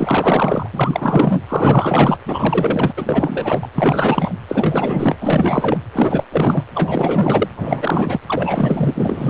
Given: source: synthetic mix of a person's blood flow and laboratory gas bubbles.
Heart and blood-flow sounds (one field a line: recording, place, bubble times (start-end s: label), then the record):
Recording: Doppler ultrasound of blood flow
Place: precordium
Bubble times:
0.00-0.68 s: bubbles
0.72-1.42 s: bubbles
1.48-2.19 s: bubbles
2.25-2.93 s: bubbles
2.97-3.69 s: bubbles
3.74-4.33 s: bubbles
4.48-5.17 s: bubbles
5.21-5.77 s: bubbles
5.92-6.24 s: bubbles
6.32-6.64 s: bubbles
6.74-7.48 s: bubbles
7.56-8.20 s: bubbles
8.26-9.29 s: bubbles
From the record:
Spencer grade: 4 (maximum detectable bubble signal sounding continuously throughout systole and diastole of every cardiac period, and overriding the amplitude of the normal cardiac signals)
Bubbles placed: anywhere in the cardiac cycle